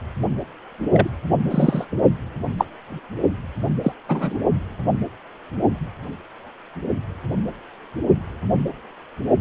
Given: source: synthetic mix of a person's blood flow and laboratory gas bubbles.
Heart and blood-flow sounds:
Doppler ultrasound of blood flow; precordium
0.92-1.09 s: bubbles
1.50-1.85 s: bubbles
2.58-2.65 s: bubbles
3.83-3.92 s: bubbles
4.08-4.38 s: bubbles
From the record:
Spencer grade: 2 (many but less than half of the cardiac periods contain bubble signals, singularly or in groups); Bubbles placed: only in the low amplitude regions of the cardiac cycle

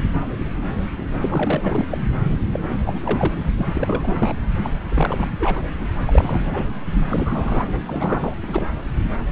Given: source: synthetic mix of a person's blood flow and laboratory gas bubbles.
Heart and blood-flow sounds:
Doppler ultrasound of blood flow; subclavian vein
1.20-1.85 s: bubbles
1.90-1.98 s: bubbles
2.52-2.60 s: bubbles
2.68-2.77 s: bubbles
2.85-3.34 s: bubbles
3.57-3.68 s: bubbles
3.73-4.34 s: bubbles
4.63-4.70 s: bubbles
4.92-5.27 s: bubbles
5.39-5.67 s: bubbles
5.77-5.86 s: bubbles
5.98-6.69 s: bubbles
6.90-8.35 s: bubbles
8.42-8.67 s: bubbles
From the record:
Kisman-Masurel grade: 332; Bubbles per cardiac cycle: rolling drumbeat, 9 or more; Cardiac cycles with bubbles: 50 to 99%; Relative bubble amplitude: moderate (0.250 to 0.450); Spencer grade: 3 (all of the cardiac periods contain showers or single bubble signals, but not dominating or overriding the cardiac motion signals); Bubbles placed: anywhere in the cardiac cycle

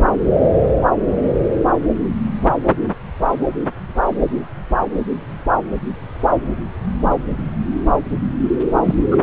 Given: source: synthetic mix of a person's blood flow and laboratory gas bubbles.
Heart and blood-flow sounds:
Doppler ultrasound of blood flow; subclavian vein
8.85-8.95 s: bubbles
9.11-9.17 s: bubbles
From the record:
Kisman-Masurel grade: 113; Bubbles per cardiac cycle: 1 to 2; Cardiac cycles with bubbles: 1 to 10%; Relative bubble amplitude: loud (0.450 to 0.775); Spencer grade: 1 (occasional bubble signal discernible with the cardiac motion signal, with majority of cardiac periods free of bubbles); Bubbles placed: anywhere in the cardiac cycle

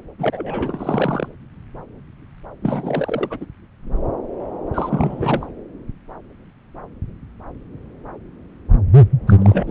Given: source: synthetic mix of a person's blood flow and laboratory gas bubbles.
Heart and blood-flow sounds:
Doppler ultrasound of blood flow; subclavian vein
0.18-1.28 s: bubbles
2.61-3.46 s: bubbles
4.74-5.47 s: bubbles
9.27-9.33 s: bubbles
9.38-9.71 s: bubbles
From the record:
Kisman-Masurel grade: 332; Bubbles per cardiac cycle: rolling drumbeat, 9 or more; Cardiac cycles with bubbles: 50 to 99%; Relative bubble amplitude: moderate (0.250 to 0.450); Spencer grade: 3 (all of the cardiac periods contain showers or single bubble signals, but not dominating or overriding the cardiac motion signals); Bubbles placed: anywhere in the cardiac cycle

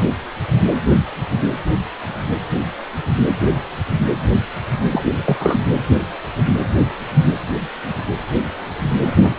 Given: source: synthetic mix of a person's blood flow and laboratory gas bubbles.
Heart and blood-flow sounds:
Doppler ultrasound of blood flow; precordium
4.91-5.20 s: bubbles
5.25-5.60 s: bubbles
From the record:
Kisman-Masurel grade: 212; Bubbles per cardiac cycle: several, 3 to 8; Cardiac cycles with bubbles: 1 to 10%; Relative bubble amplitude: moderate (0.250 to 0.450); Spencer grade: 1 (occasional bubble signal discernible with the cardiac motion signal, with majority of cardiac periods free of bubbles); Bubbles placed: anywhere in the cardiac cycle

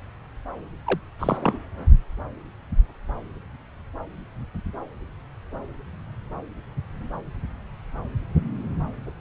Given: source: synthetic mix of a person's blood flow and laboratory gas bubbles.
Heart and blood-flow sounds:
Doppler ultrasound of blood flow; subclavian vein
0.85-0.99 s: bubbles
1.19-1.58 s: bubbles
From the record:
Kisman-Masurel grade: 212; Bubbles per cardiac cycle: several, 3 to 8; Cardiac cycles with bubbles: 1 to 10%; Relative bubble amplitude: moderate (0.250 to 0.450); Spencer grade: 1 (occasional bubble signal discernible with the cardiac motion signal, with majority of cardiac periods free of bubbles); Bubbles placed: anywhere in the cardiac cycle

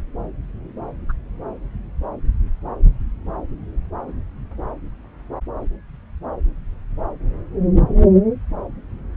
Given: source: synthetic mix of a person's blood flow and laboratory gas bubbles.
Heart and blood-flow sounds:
Doppler ultrasound of blood flow; subclavian vein
1.08-1.12 s: bubbles
From the record:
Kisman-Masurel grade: 111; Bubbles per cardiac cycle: 1 to 2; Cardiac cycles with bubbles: 1 to 10%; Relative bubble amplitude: barely perceptible (0.100 to 0.250); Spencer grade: 1 (occasional bubble signal discernible with the cardiac motion signal, with majority of cardiac periods free of bubbles); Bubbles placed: anywhere in the cardiac cycle

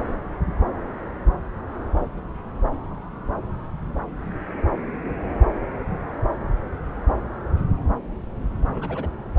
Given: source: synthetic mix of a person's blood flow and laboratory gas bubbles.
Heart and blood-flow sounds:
Doppler ultrasound of blood flow; subclavian vein
8.61-8.64 s: bubbles
8.67-9.10 s: bubbles
From the record:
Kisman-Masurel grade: 111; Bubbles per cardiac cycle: 1 to 2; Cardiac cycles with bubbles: 1 to 10%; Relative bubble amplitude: barely perceptible (0.100 to 0.250); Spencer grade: 1 (occasional bubble signal discernible with the cardiac motion signal, with majority of cardiac periods free of bubbles); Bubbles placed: anywhere in the cardiac cycle

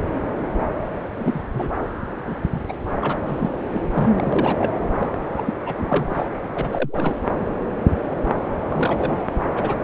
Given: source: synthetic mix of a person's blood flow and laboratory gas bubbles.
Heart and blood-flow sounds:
Doppler ultrasound of blood flow; subclavian vein
1.18-1.49 s: bubbles
1.53-1.67 s: bubbles
2.27-2.35 s: bubbles
2.43-2.49 s: bubbles
2.53-2.61 s: bubbles
2.69-2.73 s: bubbles
3.00-3.19 s: bubbles
3.26-3.49 s: bubbles
3.72-3.81 s: bubbles
3.95-4.11 s: bubbles
4.18-4.72 s: bubbles
4.99-5.09 s: bubbles
5.37-5.54 s: bubbles
5.66-6.28 s: bubbles
6.55-6.69 s: bubbles
6.72-7.14 s: bubbles
8.70-9.26 s: bubbles
9.33-9.43 s: bubbles
9.55-9.74 s: bubbles
From the record:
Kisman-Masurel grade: 232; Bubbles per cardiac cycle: several, 3 to 8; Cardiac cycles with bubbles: 50 to 99%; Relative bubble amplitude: moderate (0.250 to 0.450); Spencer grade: 3 (all of the cardiac periods contain showers or single bubble signals, but not dominating or overriding the cardiac motion signals); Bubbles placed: anywhere in the cardiac cycle

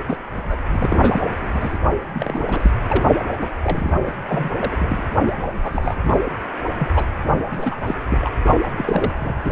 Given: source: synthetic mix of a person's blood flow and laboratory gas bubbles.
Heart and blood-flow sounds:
Doppler ultrasound of blood flow; precordium
0.07-0.17 s: bubbles
0.33-1.20 s: bubbles
1.41-1.78 s: bubbles
2.14-2.71 s: bubbles
2.90-3.03 s: bubbles
3.41-3.49 s: bubbles
3.63-3.98 s: bubbles
4.06-4.12 s: bubbles
4.28-4.50 s: bubbles
4.55-5.04 s: bubbles
5.28-5.33 s: bubbles
5.63-5.96 s: bubbles
6.03-6.20 s: bubbles
6.79-7.05 s: bubbles
7.52-7.75 s: bubbles
7.87-7.95 s: bubbles
8.09-8.29 s: bubbles
8.46-8.54 s: bubbles
8.62-8.71 s: bubbles
8.77-9.13 s: bubbles
9.20-9.33 s: bubbles
9.45-9.52 s: bubbles
From the record:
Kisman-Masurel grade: 342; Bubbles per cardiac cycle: rolling drumbeat, 9 or more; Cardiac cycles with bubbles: 100%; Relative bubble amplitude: moderate (0.250 to 0.450); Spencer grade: 3 (all of the cardiac periods contain showers or single bubble signals, but not dominating or overriding the cardiac motion signals); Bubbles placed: anywhere in the cardiac cycle

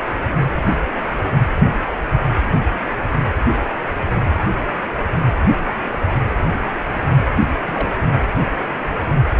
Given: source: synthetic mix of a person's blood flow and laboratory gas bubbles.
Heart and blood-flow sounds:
Doppler ultrasound of blood flow; precordium
7.68-7.88 s: bubbles
From the record:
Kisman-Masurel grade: 111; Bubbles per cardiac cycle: 1 to 2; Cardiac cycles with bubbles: 1 to 10%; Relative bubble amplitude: barely perceptible (0.100 to 0.250); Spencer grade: 1 (occasional bubble signal discernible with the cardiac motion signal, with majority of cardiac periods free of bubbles); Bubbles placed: anywhere in the cardiac cycle

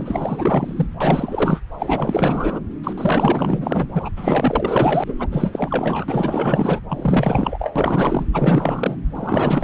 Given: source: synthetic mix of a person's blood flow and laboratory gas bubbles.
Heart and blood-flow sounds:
Doppler ultrasound of blood flow; subclavian vein
0.00-0.86 s: bubbles
1.00-1.60 s: bubbles
1.78-2.60 s: bubbles
2.83-2.93 s: bubbles
2.97-3.88 s: bubbles
3.92-4.09 s: bubbles
4.16-5.14 s: bubbles
5.18-5.27 s: bubbles
5.31-6.80 s: bubbles
6.88-7.72 s: bubbles
7.75-8.25 s: bubbles
8.32-8.96 s: bubbles
9.15-9.63 s: bubbles
From the record:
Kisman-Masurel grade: 444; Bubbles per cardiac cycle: continuous sound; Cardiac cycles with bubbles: 100%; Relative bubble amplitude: maximal (0.775 to 0.999); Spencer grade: 4 (maximum detectable bubble signal sounding continuously throughout systole and diastole of every cardiac period, and overriding the amplitude of the normal cardiac signals); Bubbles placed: anywhere in the cardiac cycle

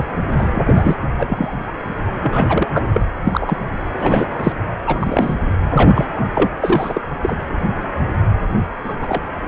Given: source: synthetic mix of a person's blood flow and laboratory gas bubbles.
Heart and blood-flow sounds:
Doppler ultrasound of blood flow; precordium
0.00-0.05 s: bubbles
0.38-0.95 s: bubbles
1.18-1.73 s: bubbles
2.21-2.68 s: bubbles
2.73-3.06 s: bubbles
3.25-3.58 s: bubbles
3.98-4.27 s: bubbles
4.38-4.52 s: bubbles
4.86-5.35 s: bubbles
5.69-6.07 s: bubbles
6.18-6.25 s: bubbles
6.34-6.49 s: bubbles
6.59-7.01 s: bubbles
7.22-7.38 s: bubbles
8.84-8.93 s: bubbles
9.01-9.22 s: bubbles
From the record:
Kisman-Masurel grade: 233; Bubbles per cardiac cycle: several, 3 to 8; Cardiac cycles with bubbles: 50 to 99%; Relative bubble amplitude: loud (0.450 to 0.775); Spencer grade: 3 (all of the cardiac periods contain showers or single bubble signals, but not dominating or overriding the cardiac motion signals); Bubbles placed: anywhere in the cardiac cycle

